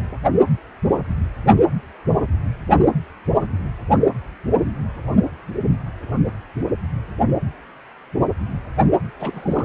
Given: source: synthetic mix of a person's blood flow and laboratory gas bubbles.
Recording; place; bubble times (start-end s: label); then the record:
Doppler ultrasound of blood flow; precordium
9.20-9.65 s: bubbles
From the record:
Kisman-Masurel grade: 211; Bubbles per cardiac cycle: several, 3 to 8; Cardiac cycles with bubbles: 1 to 10%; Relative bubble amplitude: barely perceptible (0.100 to 0.250); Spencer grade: 1 (occasional bubble signal discernible with the cardiac motion signal, with majority of cardiac periods free of bubbles); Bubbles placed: anywhere in the cardiac cycle